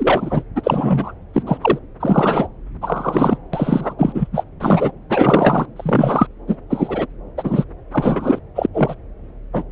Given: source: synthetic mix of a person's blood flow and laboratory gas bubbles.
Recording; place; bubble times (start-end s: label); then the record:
Doppler ultrasound of blood flow; subclavian vein
0.00-0.43 s: bubbles
0.56-1.12 s: bubbles
1.34-1.42 s: bubbles
1.46-1.57 s: bubbles
1.61-1.79 s: bubbles
2.00-2.48 s: bubbles
2.81-3.38 s: bubbles
3.53-3.94 s: bubbles
3.98-4.27 s: bubbles
4.33-4.44 s: bubbles
4.60-4.92 s: bubbles
5.09-5.66 s: bubbles
5.76-6.27 s: bubbles
6.47-6.57 s: bubbles
6.70-7.07 s: bubbles
7.38-7.65 s: bubbles
7.93-8.39 s: bubbles
8.55-8.67 s: bubbles
8.73-8.95 s: bubbles
9.53-9.63 s: bubbles
From the record:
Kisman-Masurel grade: 243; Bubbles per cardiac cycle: several, 3 to 8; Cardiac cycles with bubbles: 100%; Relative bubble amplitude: loud (0.450 to 0.775); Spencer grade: 3 (all of the cardiac periods contain showers or single bubble signals, but not dominating or overriding the cardiac motion signals); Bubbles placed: anywhere in the cardiac cycle